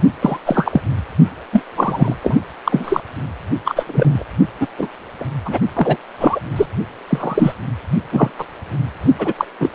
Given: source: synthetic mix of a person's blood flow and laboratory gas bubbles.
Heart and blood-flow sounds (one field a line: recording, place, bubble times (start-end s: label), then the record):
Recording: Doppler ultrasound of blood flow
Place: precordium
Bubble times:
0.21-0.38 s: bubbles
0.46-0.81 s: bubbles
1.52-1.62 s: bubbles
1.76-2.15 s: bubbles
2.22-2.38 s: bubbles
2.65-3.00 s: bubbles
3.65-3.83 s: bubbles
3.86-4.24 s: bubbles
4.60-4.67 s: bubbles
4.78-4.88 s: bubbles
5.21-5.25 s: bubbles
5.45-5.59 s: bubbles
5.75-5.97 s: bubbles
6.18-6.40 s: bubbles
6.56-6.66 s: bubbles
7.07-7.53 s: bubbles
8.12-8.31 s: bubbles
8.39-8.45 s: bubbles
9.18-9.33 s: bubbles
9.38-9.45 s: bubbles
9.60-9.69 s: bubbles
From the record:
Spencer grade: 3 (all of the cardiac periods contain showers or single bubble signals, but not dominating or overriding the cardiac motion signals)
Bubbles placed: only in the low amplitude regions of the cardiac cycle